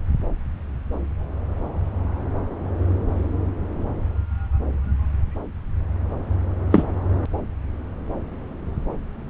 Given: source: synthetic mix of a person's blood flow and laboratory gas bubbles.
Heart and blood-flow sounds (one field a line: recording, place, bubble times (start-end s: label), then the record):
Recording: Doppler ultrasound of blood flow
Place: subclavian vein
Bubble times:
6.71-6.83 s: bubbles
From the record:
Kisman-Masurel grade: 123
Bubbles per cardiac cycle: 1 to 2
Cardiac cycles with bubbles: 10 to 50%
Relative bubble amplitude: loud (0.450 to 0.775)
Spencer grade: 2 (many but less than half of the cardiac periods contain bubble signals, singularly or in groups)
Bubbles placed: anywhere in the cardiac cycle